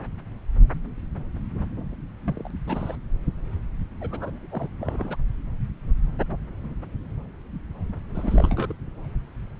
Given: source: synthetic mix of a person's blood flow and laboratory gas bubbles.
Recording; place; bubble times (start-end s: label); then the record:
Doppler ultrasound of blood flow; subclavian vein
2.23-2.48 s: bubbles
2.67-2.96 s: bubbles
4.00-4.47 s: bubbles
4.52-4.69 s: bubbles
4.80-5.16 s: bubbles
8.14-8.73 s: bubbles
From the record:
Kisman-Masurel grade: 221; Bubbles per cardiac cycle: several, 3 to 8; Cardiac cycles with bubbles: 10 to 50%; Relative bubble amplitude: barely perceptible (0.100 to 0.250); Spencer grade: 2 (many but less than half of the cardiac periods contain bubble signals, singularly or in groups); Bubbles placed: anywhere in the cardiac cycle